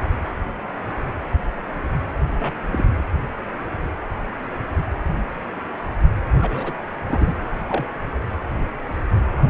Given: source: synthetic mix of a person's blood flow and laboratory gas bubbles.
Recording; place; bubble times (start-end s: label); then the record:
Doppler ultrasound of blood flow; precordium
2.40-2.54 s: bubbles
2.71-2.85 s: bubbles
6.41-6.73 s: bubbles
7.07-7.33 s: bubbles
7.70-7.94 s: bubbles
9.37-9.50 s: bubbles
From the record:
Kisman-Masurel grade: 222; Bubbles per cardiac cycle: several, 3 to 8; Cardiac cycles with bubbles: 10 to 50%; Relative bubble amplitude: moderate (0.250 to 0.450); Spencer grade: 2 (many but less than half of the cardiac periods contain bubble signals, singularly or in groups); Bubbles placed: anywhere in the cardiac cycle